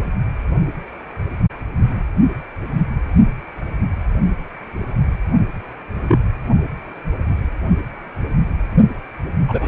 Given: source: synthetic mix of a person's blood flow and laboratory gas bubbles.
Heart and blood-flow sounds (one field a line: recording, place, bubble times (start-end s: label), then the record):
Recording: Doppler ultrasound of blood flow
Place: precordium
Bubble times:
6.02-6.17 s: bubbles
9.48-9.68 s: bubbles
From the record:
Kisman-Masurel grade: 122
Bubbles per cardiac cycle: 1 to 2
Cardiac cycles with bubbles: 10 to 50%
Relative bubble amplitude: moderate (0.250 to 0.450)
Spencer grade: 2 (many but less than half of the cardiac periods contain bubble signals, singularly or in groups)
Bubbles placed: only in the low amplitude regions of the cardiac cycle